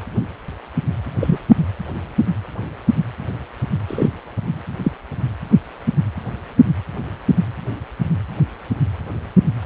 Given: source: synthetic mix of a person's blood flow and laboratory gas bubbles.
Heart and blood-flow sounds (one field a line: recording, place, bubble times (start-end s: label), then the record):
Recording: Doppler ultrasound of blood flow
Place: precordium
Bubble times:
1.20-1.38 s: bubbles
3.88-4.08 s: bubbles
4.84-4.92 s: bubbles
From the record:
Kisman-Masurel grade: 123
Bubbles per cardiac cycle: 1 to 2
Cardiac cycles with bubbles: 10 to 50%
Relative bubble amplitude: loud (0.450 to 0.775)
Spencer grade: 2 (many but less than half of the cardiac periods contain bubble signals, singularly or in groups)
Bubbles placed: anywhere in the cardiac cycle